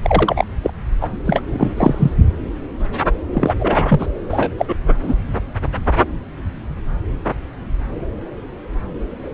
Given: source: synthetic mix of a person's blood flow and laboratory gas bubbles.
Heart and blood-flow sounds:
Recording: Doppler ultrasound of blood flow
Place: subclavian vein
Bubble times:
0.02-0.45 s: bubbles
0.63-0.70 s: bubbles
1.01-1.08 s: bubbles
1.26-1.41 s: bubbles
1.53-2.14 s: bubbles
3.33-3.54 s: bubbles
3.59-4.06 s: bubbles
4.29-4.52 s: bubbles
4.58-4.66 s: bubbles
4.68-4.75 s: bubbles
5.02-5.16 s: bubbles
From the record:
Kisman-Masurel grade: 233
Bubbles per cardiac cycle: several, 3 to 8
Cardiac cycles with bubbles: 50 to 99%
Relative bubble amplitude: loud (0.450 to 0.775)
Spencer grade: 3 (all of the cardiac periods contain showers or single bubble signals, but not dominating or overriding the cardiac motion signals)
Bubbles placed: anywhere in the cardiac cycle

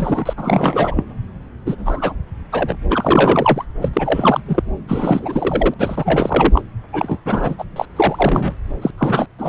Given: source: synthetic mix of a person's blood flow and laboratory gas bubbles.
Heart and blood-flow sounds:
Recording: Doppler ultrasound of blood flow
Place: subclavian vein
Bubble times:
0.00-0.34 s: bubbles
0.37-1.04 s: bubbles
1.66-1.75 s: bubbles
1.78-2.14 s: bubbles
2.52-2.75 s: bubbles
2.89-3.65 s: bubbles
3.82-3.88 s: bubbles
3.93-4.42 s: bubbles
4.47-4.63 s: bubbles
4.88-5.74 s: bubbles
5.78-6.62 s: bubbles
6.92-7.19 s: bubbles
7.25-7.56 s: bubbles
7.58-7.64 s: bubbles
7.76-7.85 s: bubbles
7.95-8.53 s: bubbles
8.81-8.90 s: bubbles
8.97-9.26 s: bubbles
9.38-9.49 s: bubbles
From the record:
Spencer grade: 3 (all of the cardiac periods contain showers or single bubble signals, but not dominating or overriding the cardiac motion signals)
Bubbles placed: anywhere in the cardiac cycle

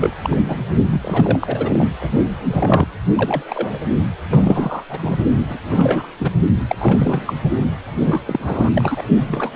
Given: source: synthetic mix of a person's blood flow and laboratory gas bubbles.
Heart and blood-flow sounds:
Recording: Doppler ultrasound of blood flow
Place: precordium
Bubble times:
0.00-0.15 s: bubbles
0.22-0.41 s: bubbles
0.43-0.64 s: bubbles
0.91-1.88 s: bubbles
2.01-2.09 s: bubbles
2.50-2.88 s: bubbles
3.15-3.43 s: bubbles
3.47-3.79 s: bubbles
4.30-4.83 s: bubbles
4.89-5.18 s: bubbles
5.50-5.58 s: bubbles
5.67-6.08 s: bubbles
6.19-6.30 s: bubbles
6.68-6.76 s: bubbles
6.80-7.34 s: bubbles
7.98-8.21 s: bubbles
8.26-8.71 s: bubbles
8.75-9.02 s: bubbles
9.27-9.53 s: bubbles
From the record:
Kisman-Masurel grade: 342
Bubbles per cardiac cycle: rolling drumbeat, 9 or more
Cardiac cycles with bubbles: 100%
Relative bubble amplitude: moderate (0.250 to 0.450)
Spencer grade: 3 (all of the cardiac periods contain showers or single bubble signals, but not dominating or overriding the cardiac motion signals)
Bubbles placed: only in the low amplitude regions of the cardiac cycle

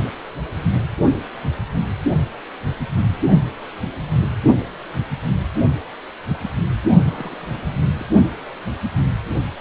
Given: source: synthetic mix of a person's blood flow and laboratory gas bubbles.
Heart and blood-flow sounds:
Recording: Doppler ultrasound of blood flow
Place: precordium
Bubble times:
7.06-7.55 s: bubbles
8.00-8.06 s: bubbles
From the record:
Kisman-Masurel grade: 111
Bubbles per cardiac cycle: 1 to 2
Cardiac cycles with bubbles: 1 to 10%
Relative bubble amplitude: barely perceptible (0.100 to 0.250)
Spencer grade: 1 (occasional bubble signal discernible with the cardiac motion signal, with majority of cardiac periods free of bubbles)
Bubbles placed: only in the low amplitude regions of the cardiac cycle

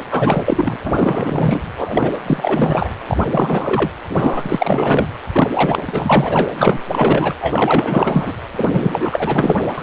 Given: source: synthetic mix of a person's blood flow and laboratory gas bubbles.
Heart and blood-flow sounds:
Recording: Doppler ultrasound of blood flow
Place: precordium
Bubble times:
0.10-0.79 s: bubbles
0.86-1.62 s: bubbles
1.77-2.17 s: bubbles
2.27-2.88 s: bubbles
3.07-3.17 s: bubbles
3.31-3.90 s: bubbles
4.09-5.06 s: bubbles
5.32-5.83 s: bubbles
5.87-6.50 s: bubbles
6.53-6.82 s: bubbles
6.92-7.33 s: bubbles
7.41-8.35 s: bubbles
8.55-9.56 s: bubbles
9.78-9.83 s: bubbles
From the record:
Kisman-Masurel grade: 444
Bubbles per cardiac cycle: continuous sound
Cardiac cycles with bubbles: 100%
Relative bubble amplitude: maximal (0.775 to 0.999)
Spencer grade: 4 (maximum detectable bubble signal sounding continuously throughout systole and diastole of every cardiac period, and overriding the amplitude of the normal cardiac signals)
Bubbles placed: anywhere in the cardiac cycle

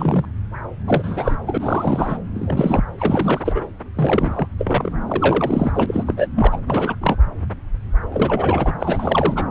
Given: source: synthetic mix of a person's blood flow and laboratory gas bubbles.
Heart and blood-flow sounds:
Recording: Doppler ultrasound of blood flow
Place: subclavian vein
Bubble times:
0.00-0.26 s: bubbles
0.87-1.36 s: bubbles
1.46-2.23 s: bubbles
2.34-2.84 s: bubbles
2.98-3.67 s: bubbles
3.94-4.48 s: bubbles
4.58-4.90 s: bubbles
5.06-6.28 s: bubbles
6.35-6.60 s: bubbles
6.67-6.96 s: bubbles
7.01-7.17 s: bubbles
8.02-8.73 s: bubbles
8.79-9.45 s: bubbles
From the record:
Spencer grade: 3 (all of the cardiac periods contain showers or single bubble signals, but not dominating or overriding the cardiac motion signals)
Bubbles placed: anywhere in the cardiac cycle

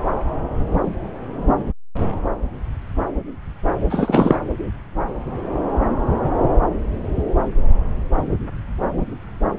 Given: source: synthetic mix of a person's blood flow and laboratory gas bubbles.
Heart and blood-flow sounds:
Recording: Doppler ultrasound of blood flow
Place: subclavian vein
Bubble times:
3.90-4.39 s: bubbles
From the record:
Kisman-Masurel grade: 213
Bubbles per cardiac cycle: several, 3 to 8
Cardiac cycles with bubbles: 1 to 10%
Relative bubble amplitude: loud (0.450 to 0.775)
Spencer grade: 1 (occasional bubble signal discernible with the cardiac motion signal, with majority of cardiac periods free of bubbles)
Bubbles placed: anywhere in the cardiac cycle

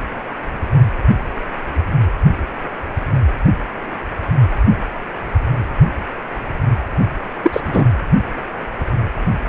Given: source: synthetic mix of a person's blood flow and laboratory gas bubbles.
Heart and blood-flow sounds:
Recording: Doppler ultrasound of blood flow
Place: precordium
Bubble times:
7.43-7.60 s: bubbles
7.67-7.84 s: bubbles
From the record:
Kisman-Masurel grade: 213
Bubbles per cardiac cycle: several, 3 to 8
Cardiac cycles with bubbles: 1 to 10%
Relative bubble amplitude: loud (0.450 to 0.775)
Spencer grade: 1 (occasional bubble signal discernible with the cardiac motion signal, with majority of cardiac periods free of bubbles)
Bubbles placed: anywhere in the cardiac cycle

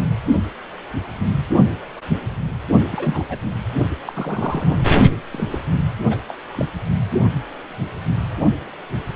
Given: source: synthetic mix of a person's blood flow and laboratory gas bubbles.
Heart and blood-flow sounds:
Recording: Doppler ultrasound of blood flow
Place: precordium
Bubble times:
2.91-3.38 s: bubbles
4.05-4.86 s: bubbles
5.32-5.58 s: bubbles
6.06-6.17 s: bubbles
6.28-6.34 s: bubbles
6.53-6.66 s: bubbles
From the record:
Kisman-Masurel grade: 221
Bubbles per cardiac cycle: several, 3 to 8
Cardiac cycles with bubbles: 10 to 50%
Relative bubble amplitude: barely perceptible (0.100 to 0.250)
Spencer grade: 2 (many but less than half of the cardiac periods contain bubble signals, singularly or in groups)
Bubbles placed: only in the low amplitude regions of the cardiac cycle

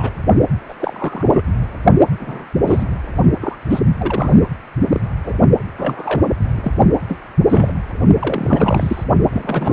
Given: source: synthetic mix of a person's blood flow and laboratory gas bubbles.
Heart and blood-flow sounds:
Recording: Doppler ultrasound of blood flow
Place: precordium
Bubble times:
0.00-0.10 s: bubbles
0.69-0.74 s: bubbles
0.80-1.42 s: bubbles
2.19-2.45 s: bubbles
2.67-2.88 s: bubbles
3.40-3.56 s: bubbles
3.69-3.79 s: bubbles
3.98-4.47 s: bubbles
4.90-5.00 s: bubbles
5.25-5.38 s: bubbles
5.78-6.21 s: bubbles
6.41-6.75 s: bubbles
7.08-7.17 s: bubbles
7.50-7.74 s: bubbles
8.21-9.04 s: bubbles
9.30-9.73 s: bubbles
From the record:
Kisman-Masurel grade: 232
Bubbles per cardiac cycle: several, 3 to 8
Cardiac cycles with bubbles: 50 to 99%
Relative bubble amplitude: moderate (0.250 to 0.450)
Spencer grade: 3 (all of the cardiac periods contain showers or single bubble signals, but not dominating or overriding the cardiac motion signals)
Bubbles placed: only in the low amplitude regions of the cardiac cycle

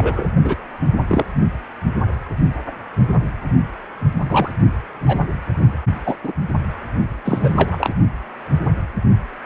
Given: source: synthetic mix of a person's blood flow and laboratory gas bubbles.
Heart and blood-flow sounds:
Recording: Doppler ultrasound of blood flow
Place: precordium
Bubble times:
0.00-0.28 s: bubbles
0.43-0.55 s: bubbles
1.08-1.24 s: bubbles
4.25-4.50 s: bubbles
5.07-5.19 s: bubbles
6.05-6.16 s: bubbles
6.24-6.33 s: bubbles
7.25-7.94 s: bubbles
From the record:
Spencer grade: 3 (all of the cardiac periods contain showers or single bubble signals, but not dominating or overriding the cardiac motion signals)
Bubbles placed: only in the low amplitude regions of the cardiac cycle

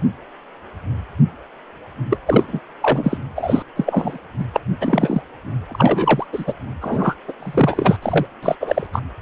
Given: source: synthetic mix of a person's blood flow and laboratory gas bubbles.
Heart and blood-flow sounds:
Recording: Doppler ultrasound of blood flow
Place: precordium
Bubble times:
2.09-2.19 s: bubbles
2.26-2.60 s: bubbles
2.81-3.17 s: bubbles
3.35-3.62 s: bubbles
3.75-4.18 s: bubbles
4.38-4.45 s: bubbles
4.53-4.60 s: bubbles
4.80-5.22 s: bubbles
5.68-6.26 s: bubbles
6.33-6.45 s: bubbles
6.47-6.54 s: bubbles
6.81-7.15 s: bubbles
7.28-7.33 s: bubbles
7.39-7.99 s: bubbles
8.02-8.26 s: bubbles
8.42-8.56 s: bubbles
8.60-8.87 s: bubbles
8.93-9.01 s: bubbles
From the record:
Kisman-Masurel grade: 333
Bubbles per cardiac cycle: rolling drumbeat, 9 or more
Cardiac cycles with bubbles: 50 to 99%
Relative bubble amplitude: loud (0.450 to 0.775)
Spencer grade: 3 (all of the cardiac periods contain showers or single bubble signals, but not dominating or overriding the cardiac motion signals)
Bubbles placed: anywhere in the cardiac cycle

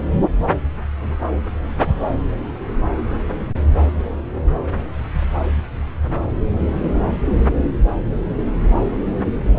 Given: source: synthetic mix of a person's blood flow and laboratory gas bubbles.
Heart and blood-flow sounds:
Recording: Doppler ultrasound of blood flow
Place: subclavian vein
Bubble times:
no bubbles
From the record:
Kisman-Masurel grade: 000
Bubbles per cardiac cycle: 0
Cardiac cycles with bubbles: 0%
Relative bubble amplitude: no bubbles discernible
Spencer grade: 0 (complete lack of bubble signals)

